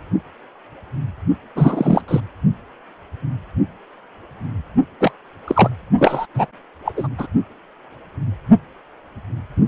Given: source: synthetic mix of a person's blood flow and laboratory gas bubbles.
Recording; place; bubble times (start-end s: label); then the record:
Doppler ultrasound of blood flow; precordium
1.55-2.01 s: bubbles
2.08-2.20 s: bubbles
5.00-5.12 s: bubbles
5.47-5.69 s: bubbles
5.98-6.26 s: bubbles
6.35-6.46 s: bubbles
6.84-6.92 s: bubbles
6.96-7.08 s: bubbles
7.17-7.27 s: bubbles
From the record:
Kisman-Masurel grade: 223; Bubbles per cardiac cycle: several, 3 to 8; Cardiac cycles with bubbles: 10 to 50%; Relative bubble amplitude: loud (0.450 to 0.775); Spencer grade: 2 (many but less than half of the cardiac periods contain bubble signals, singularly or in groups); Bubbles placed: only in the low amplitude regions of the cardiac cycle